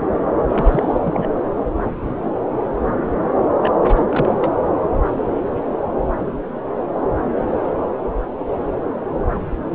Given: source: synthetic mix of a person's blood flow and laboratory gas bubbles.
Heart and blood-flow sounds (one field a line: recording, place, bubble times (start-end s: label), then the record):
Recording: Doppler ultrasound of blood flow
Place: subclavian vein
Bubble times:
0.49-0.98 s: bubbles
1.06-1.27 s: bubbles
3.62-3.72 s: bubbles
3.88-4.02 s: bubbles
4.09-4.50 s: bubbles
From the record:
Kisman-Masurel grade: 222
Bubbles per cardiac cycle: several, 3 to 8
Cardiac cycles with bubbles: 10 to 50%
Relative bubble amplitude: moderate (0.250 to 0.450)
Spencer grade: 2 (many but less than half of the cardiac periods contain bubble signals, singularly or in groups)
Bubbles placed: anywhere in the cardiac cycle